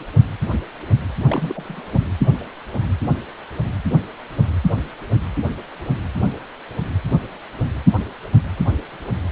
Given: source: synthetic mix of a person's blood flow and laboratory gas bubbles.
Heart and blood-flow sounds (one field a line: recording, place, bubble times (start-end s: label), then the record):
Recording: Doppler ultrasound of blood flow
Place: precordium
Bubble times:
1.27-2.00 s: bubbles
From the record:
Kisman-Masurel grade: 211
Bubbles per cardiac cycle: several, 3 to 8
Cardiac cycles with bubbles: 1 to 10%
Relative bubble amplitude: barely perceptible (0.100 to 0.250)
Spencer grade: 1 (occasional bubble signal discernible with the cardiac motion signal, with majority of cardiac periods free of bubbles)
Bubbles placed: anywhere in the cardiac cycle